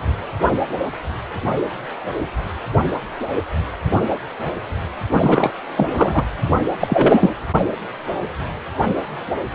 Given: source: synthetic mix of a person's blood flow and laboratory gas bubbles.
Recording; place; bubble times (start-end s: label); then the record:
Doppler ultrasound of blood flow; precordium
5.11-5.51 s: bubbles
5.77-6.26 s: bubbles
6.79-7.30 s: bubbles
From the record:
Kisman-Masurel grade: 223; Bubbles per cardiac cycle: several, 3 to 8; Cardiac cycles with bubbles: 10 to 50%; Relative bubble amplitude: loud (0.450 to 0.775); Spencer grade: 2 (many but less than half of the cardiac periods contain bubble signals, singularly or in groups); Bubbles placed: anywhere in the cardiac cycle